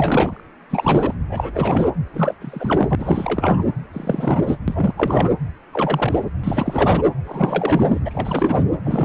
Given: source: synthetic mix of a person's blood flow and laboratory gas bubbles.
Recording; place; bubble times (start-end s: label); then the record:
Doppler ultrasound of blood flow; precordium
0.00-0.44 s: bubbles
0.70-1.15 s: bubbles
1.29-1.89 s: bubbles
2.13-2.34 s: bubbles
2.41-2.95 s: bubbles
2.99-3.63 s: bubbles
3.92-4.58 s: bubbles
4.67-5.30 s: bubbles
5.73-6.25 s: bubbles
6.43-7.02 s: bubbles
7.24-7.99 s: bubbles
8.05-8.64 s: bubbles
8.84-9.05 s: bubbles
From the record:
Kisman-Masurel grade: 343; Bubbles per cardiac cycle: rolling drumbeat, 9 or more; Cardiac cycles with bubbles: 100%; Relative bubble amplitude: loud (0.450 to 0.775); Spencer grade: 3 (all of the cardiac periods contain showers or single bubble signals, but not dominating or overriding the cardiac motion signals); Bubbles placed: anywhere in the cardiac cycle